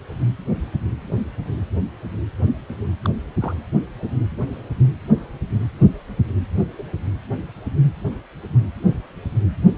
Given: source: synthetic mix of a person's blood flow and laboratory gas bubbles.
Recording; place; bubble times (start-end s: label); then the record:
Doppler ultrasound of blood flow; precordium
3.03-3.10 s: bubbles
3.40-3.55 s: bubbles
6.78-6.83 s: bubbles
From the record:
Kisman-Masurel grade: 121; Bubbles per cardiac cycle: 1 to 2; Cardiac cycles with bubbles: 10 to 50%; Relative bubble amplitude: barely perceptible (0.100 to 0.250); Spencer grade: 2 (many but less than half of the cardiac periods contain bubble signals, singularly or in groups); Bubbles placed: anywhere in the cardiac cycle